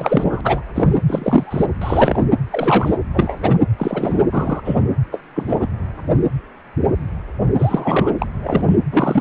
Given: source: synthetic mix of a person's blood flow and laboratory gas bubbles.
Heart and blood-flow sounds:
Doppler ultrasound of blood flow; precordium
0.00-0.41 s: bubbles
0.43-0.62 s: bubbles
0.74-0.98 s: bubbles
1.07-1.66 s: bubbles
1.81-2.24 s: bubbles
2.48-2.97 s: bubbles
3.13-3.57 s: bubbles
3.78-4.24 s: bubbles
4.32-4.61 s: bubbles
4.64-4.81 s: bubbles
5.12-5.20 s: bubbles
5.35-5.67 s: bubbles
7.58-8.12 s: bubbles
8.18-8.28 s: bubbles
8.34-8.78 s: bubbles
8.92-9.21 s: bubbles
From the record:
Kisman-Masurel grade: 233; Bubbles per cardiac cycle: several, 3 to 8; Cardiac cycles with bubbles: 50 to 99%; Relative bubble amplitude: loud (0.450 to 0.775); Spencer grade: 3 (all of the cardiac periods contain showers or single bubble signals, but not dominating or overriding the cardiac motion signals); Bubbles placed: anywhere in the cardiac cycle

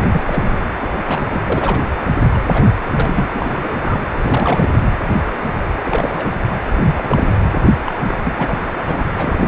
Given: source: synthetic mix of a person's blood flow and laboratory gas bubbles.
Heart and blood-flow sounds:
Doppler ultrasound of blood flow; precordium
0.11-0.60 s: bubbles
0.79-0.90 s: bubbles
1.08-1.42 s: bubbles
1.50-1.79 s: bubbles
2.33-2.39 s: bubbles
2.42-2.64 s: bubbles
2.85-2.91 s: bubbles
2.96-3.27 s: bubbles
3.34-4.04 s: bubbles
4.16-4.70 s: bubbles
5.83-6.32 s: bubbles
6.71-7.27 s: bubbles
7.85-7.92 s: bubbles
8.08-8.18 s: bubbles
8.24-8.33 s: bubbles
8.36-8.57 s: bubbles
8.78-9.04 s: bubbles
9.13-9.48 s: bubbles
From the record:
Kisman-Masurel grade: 332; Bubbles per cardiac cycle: rolling drumbeat, 9 or more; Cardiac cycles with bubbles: 50 to 99%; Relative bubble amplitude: moderate (0.250 to 0.450); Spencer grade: 3 (all of the cardiac periods contain showers or single bubble signals, but not dominating or overriding the cardiac motion signals); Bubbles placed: anywhere in the cardiac cycle

